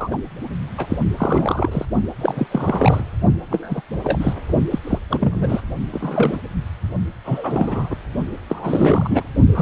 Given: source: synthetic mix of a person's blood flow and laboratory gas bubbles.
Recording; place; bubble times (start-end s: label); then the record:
Doppler ultrasound of blood flow; precordium
0.00-0.18 s: bubbles
0.77-0.86 s: bubbles
0.90-0.97 s: bubbles
1.17-1.85 s: bubbles
2.21-2.47 s: bubbles
2.51-3.04 s: bubbles
3.50-3.81 s: bubbles
4.04-4.33 s: bubbles
4.70-4.79 s: bubbles
4.84-4.98 s: bubbles
5.09-5.61 s: bubbles
5.92-6.38 s: bubbles
7.25-7.96 s: bubbles
8.49-9.24 s: bubbles
9.51-9.62 s: bubbles
From the record:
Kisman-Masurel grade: 242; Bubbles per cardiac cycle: several, 3 to 8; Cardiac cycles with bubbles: 100%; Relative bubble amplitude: moderate (0.250 to 0.450); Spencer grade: 3 (all of the cardiac periods contain showers or single bubble signals, but not dominating or overriding the cardiac motion signals); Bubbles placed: only in the low amplitude regions of the cardiac cycle